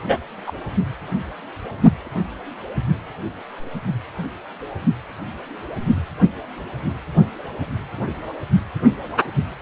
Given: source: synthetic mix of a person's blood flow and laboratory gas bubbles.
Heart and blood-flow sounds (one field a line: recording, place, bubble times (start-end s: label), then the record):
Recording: Doppler ultrasound of blood flow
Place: precordium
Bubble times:
0.08-0.18 s: bubbles
0.46-0.52 s: bubbles
From the record:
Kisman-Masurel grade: 123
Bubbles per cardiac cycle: 1 to 2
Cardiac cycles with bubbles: 10 to 50%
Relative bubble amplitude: loud (0.450 to 0.775)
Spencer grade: 2 (many but less than half of the cardiac periods contain bubble signals, singularly or in groups)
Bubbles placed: only in the low amplitude regions of the cardiac cycle